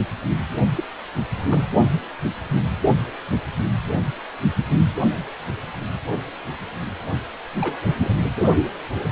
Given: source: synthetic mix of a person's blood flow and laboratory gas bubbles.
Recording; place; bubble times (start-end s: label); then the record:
Doppler ultrasound of blood flow; precordium
0.75-0.84 s: bubbles
1.34-1.65 s: bubbles
7.60-7.76 s: bubbles
7.97-8.14 s: bubbles
From the record:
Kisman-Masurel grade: 221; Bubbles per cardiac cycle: several, 3 to 8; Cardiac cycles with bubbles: 10 to 50%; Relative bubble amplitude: barely perceptible (0.100 to 0.250); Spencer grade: 2 (many but less than half of the cardiac periods contain bubble signals, singularly or in groups); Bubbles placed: only in the low amplitude regions of the cardiac cycle